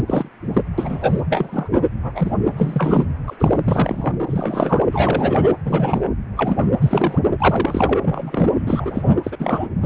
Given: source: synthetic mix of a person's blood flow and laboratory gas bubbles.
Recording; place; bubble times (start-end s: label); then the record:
Doppler ultrasound of blood flow; precordium
0.00-0.03 s: bubbles
0.07-0.28 s: bubbles
0.53-0.61 s: bubbles
0.78-1.22 s: bubbles
1.29-1.82 s: bubbles
1.92-2.31 s: bubbles
2.57-3.04 s: bubbles
3.27-3.59 s: bubbles
3.65-4.13 s: bubbles
4.26-4.81 s: bubbles
4.92-5.54 s: bubbles
5.65-6.04 s: bubbles
6.36-6.67 s: bubbles
6.81-7.18 s: bubbles
7.40-7.98 s: bubbles
8.01-8.51 s: bubbles
8.66-9.18 s: bubbles
9.23-9.37 s: bubbles
9.39-9.68 s: bubbles
9.81-9.85 s: bubbles
From the record:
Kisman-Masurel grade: 243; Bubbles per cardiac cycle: several, 3 to 8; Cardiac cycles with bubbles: 100%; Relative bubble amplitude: loud (0.450 to 0.775); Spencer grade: 3 (all of the cardiac periods contain showers or single bubble signals, but not dominating or overriding the cardiac motion signals); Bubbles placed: anywhere in the cardiac cycle